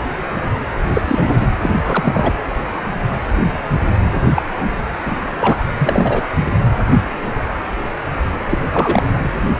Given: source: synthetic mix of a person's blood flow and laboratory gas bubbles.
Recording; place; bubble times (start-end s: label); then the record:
Doppler ultrasound of blood flow; precordium
0.93-1.01 s: bubbles
1.04-1.51 s: bubbles
1.62-1.70 s: bubbles
1.84-2.35 s: bubbles
4.35-4.42 s: bubbles
5.06-5.16 s: bubbles
5.40-5.58 s: bubbles
5.77-6.23 s: bubbles
8.50-8.58 s: bubbles
8.71-9.03 s: bubbles
From the record:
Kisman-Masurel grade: 223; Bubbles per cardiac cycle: several, 3 to 8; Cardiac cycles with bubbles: 10 to 50%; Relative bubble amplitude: loud (0.450 to 0.775); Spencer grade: 2 (many but less than half of the cardiac periods contain bubble signals, singularly or in groups); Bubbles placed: anywhere in the cardiac cycle